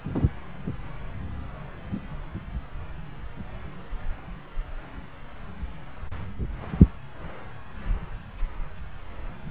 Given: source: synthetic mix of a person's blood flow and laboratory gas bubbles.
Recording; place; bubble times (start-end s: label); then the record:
Doppler ultrasound of blood flow; subclavian vein
0.14-0.26 s: bubbles
From the record:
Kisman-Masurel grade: 111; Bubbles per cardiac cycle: 1 to 2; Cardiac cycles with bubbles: 1 to 10%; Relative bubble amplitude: barely perceptible (0.100 to 0.250); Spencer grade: 1 (occasional bubble signal discernible with the cardiac motion signal, with majority of cardiac periods free of bubbles); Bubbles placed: anywhere in the cardiac cycle